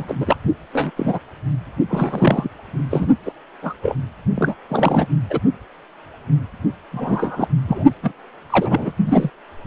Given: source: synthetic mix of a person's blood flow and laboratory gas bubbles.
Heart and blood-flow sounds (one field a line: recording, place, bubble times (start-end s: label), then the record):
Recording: Doppler ultrasound of blood flow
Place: precordium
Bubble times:
0.00-0.05 s: bubbles
0.07-0.14 s: bubbles
0.20-0.36 s: bubbles
0.73-0.91 s: bubbles
0.96-1.19 s: bubbles
1.90-2.49 s: bubbles
2.90-3.07 s: bubbles
3.25-3.32 s: bubbles
3.62-3.75 s: bubbles
3.82-3.96 s: bubbles
4.35-4.54 s: bubbles
4.69-5.06 s: bubbles
5.29-5.39 s: bubbles
6.92-7.48 s: bubbles
7.67-7.84 s: bubbles
8.03-8.12 s: bubbles
8.50-8.91 s: bubbles
9.05-9.30 s: bubbles
From the record:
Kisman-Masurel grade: 232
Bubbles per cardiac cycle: several, 3 to 8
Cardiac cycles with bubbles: 50 to 99%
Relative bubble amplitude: moderate (0.250 to 0.450)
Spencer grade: 3 (all of the cardiac periods contain showers or single bubble signals, but not dominating or overriding the cardiac motion signals)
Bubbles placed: only in the low amplitude regions of the cardiac cycle